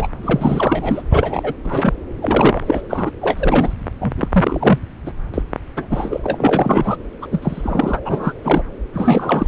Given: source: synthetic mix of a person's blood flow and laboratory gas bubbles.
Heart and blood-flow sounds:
Doppler ultrasound of blood flow; subclavian vein
0.00-0.07 s: bubbles
0.23-1.02 s: bubbles
1.11-1.53 s: bubbles
1.64-1.93 s: bubbles
2.22-2.82 s: bubbles
2.89-3.11 s: bubbles
3.21-3.74 s: bubbles
4.00-4.12 s: bubbles
4.17-4.28 s: bubbles
4.32-4.79 s: bubbles
5.06-5.12 s: bubbles
5.33-5.42 s: bubbles
5.76-5.88 s: bubbles
5.90-6.20 s: bubbles
6.23-6.96 s: bubbles
7.21-7.26 s: bubbles
7.31-8.00 s: bubbles
8.04-8.33 s: bubbles
8.44-8.63 s: bubbles
8.94-9.46 s: bubbles
From the record:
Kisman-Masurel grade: 343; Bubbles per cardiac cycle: rolling drumbeat, 9 or more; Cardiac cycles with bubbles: 100%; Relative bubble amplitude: loud (0.450 to 0.775); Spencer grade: 3 (all of the cardiac periods contain showers or single bubble signals, but not dominating or overriding the cardiac motion signals); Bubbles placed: anywhere in the cardiac cycle

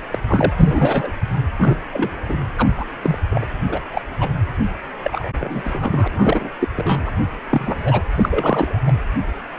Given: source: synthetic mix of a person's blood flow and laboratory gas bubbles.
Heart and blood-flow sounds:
Doppler ultrasound of blood flow; precordium
0.10-0.18 s: bubbles
0.26-0.52 s: bubbles
0.56-1.12 s: bubbles
1.58-1.77 s: bubbles
1.90-2.23 s: bubbles
2.29-2.37 s: bubbles
2.56-2.68 s: bubbles
2.77-2.85 s: bubbles
3.03-3.18 s: bubbles
3.29-3.45 s: bubbles
3.68-3.80 s: bubbles
3.93-4.02 s: bubbles
4.20-4.29 s: bubbles
5.03-5.29 s: bubbles
5.40-6.08 s: bubbles
6.12-6.50 s: bubbles
6.61-6.68 s: bubbles
6.76-7.11 s: bubbles
7.51-8.04 s: bubbles
8.15-8.82 s: bubbles
8.87-8.92 s: bubbles
From the record:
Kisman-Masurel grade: 233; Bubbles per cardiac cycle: several, 3 to 8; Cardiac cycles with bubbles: 50 to 99%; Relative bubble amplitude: loud (0.450 to 0.775); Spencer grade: 3 (all of the cardiac periods contain showers or single bubble signals, but not dominating or overriding the cardiac motion signals); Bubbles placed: anywhere in the cardiac cycle

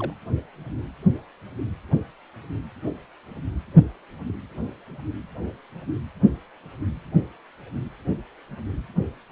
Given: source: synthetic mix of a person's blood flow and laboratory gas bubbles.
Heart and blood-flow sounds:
Doppler ultrasound of blood flow; precordium
0.00-0.14 s: bubbles
From the record:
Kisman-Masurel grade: 211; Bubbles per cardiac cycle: several, 3 to 8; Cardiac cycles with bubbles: 1 to 10%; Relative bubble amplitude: barely perceptible (0.100 to 0.250); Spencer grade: 1 (occasional bubble signal discernible with the cardiac motion signal, with majority of cardiac periods free of bubbles); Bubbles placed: anywhere in the cardiac cycle

